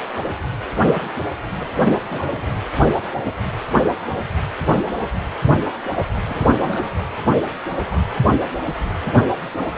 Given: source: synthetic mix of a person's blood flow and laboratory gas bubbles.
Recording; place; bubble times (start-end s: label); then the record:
Doppler ultrasound of blood flow; precordium
0.23-0.32 s: bubbles
0.65-1.15 s: bubbles
1.57-1.71 s: bubbles
2.10-2.52 s: bubbles
6.27-7.08 s: bubbles
7.38-7.49 s: bubbles
7.67-7.87 s: bubbles
7.90-8.03 s: bubbles
From the record:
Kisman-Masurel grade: 221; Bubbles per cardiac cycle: several, 3 to 8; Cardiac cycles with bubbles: 10 to 50%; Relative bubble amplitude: barely perceptible (0.100 to 0.250); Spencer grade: 2 (many but less than half of the cardiac periods contain bubble signals, singularly or in groups); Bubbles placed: anywhere in the cardiac cycle